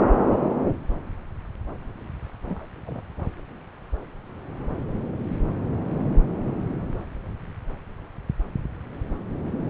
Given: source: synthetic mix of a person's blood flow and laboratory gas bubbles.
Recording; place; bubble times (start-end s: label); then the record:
Doppler ultrasound of blood flow; subclavian vein
2.46-2.65 s: bubbles
2.86-3.02 s: bubbles
From the record:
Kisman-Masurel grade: 111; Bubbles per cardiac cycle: 1 to 2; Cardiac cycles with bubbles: 1 to 10%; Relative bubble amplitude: barely perceptible (0.100 to 0.250); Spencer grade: 1 (occasional bubble signal discernible with the cardiac motion signal, with majority of cardiac periods free of bubbles); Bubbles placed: anywhere in the cardiac cycle